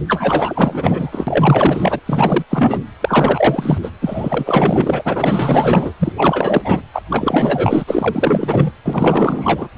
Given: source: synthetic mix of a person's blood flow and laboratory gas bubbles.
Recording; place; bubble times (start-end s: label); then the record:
Doppler ultrasound of blood flow; precordium
0.08-2.00 s: bubbles
2.05-2.44 s: bubbles
2.50-2.79 s: bubbles
3.00-3.78 s: bubbles
3.83-3.90 s: bubbles
4.01-5.03 s: bubbles
5.05-5.93 s: bubbles
5.99-6.12 s: bubbles
6.17-6.62 s: bubbles
6.65-6.82 s: bubbles
6.93-7.02 s: bubbles
7.10-7.84 s: bubbles
7.87-8.71 s: bubbles
8.85-9.68 s: bubbles
9.76-9.78 s: bubbles
From the record:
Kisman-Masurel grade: 444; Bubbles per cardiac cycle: continuous sound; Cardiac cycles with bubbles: 100%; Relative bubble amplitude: maximal (0.775 to 0.999); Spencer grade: 4 (maximum detectable bubble signal sounding continuously throughout systole and diastole of every cardiac period, and overriding the amplitude of the normal cardiac signals); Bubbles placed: anywhere in the cardiac cycle